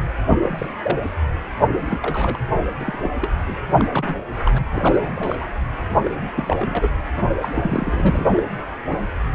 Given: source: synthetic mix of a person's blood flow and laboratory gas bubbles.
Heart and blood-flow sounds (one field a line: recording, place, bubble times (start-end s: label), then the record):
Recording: Doppler ultrasound of blood flow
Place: precordium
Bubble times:
0.30-0.37 s: bubbles
0.40-0.72 s: bubbles
0.82-0.98 s: bubbles
1.91-2.38 s: bubbles
2.79-3.10 s: bubbles
3.21-3.31 s: bubbles
3.47-3.55 s: bubbles
3.77-3.85 s: bubbles
3.92-4.15 s: bubbles
4.45-4.58 s: bubbles
4.65-5.46 s: bubbles
6.04-6.11 s: bubbles
6.35-6.88 s: bubbles
7.16-7.29 s: bubbles
7.42-8.43 s: bubbles
From the record:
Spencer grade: 3 (all of the cardiac periods contain showers or single bubble signals, but not dominating or overriding the cardiac motion signals)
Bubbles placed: anywhere in the cardiac cycle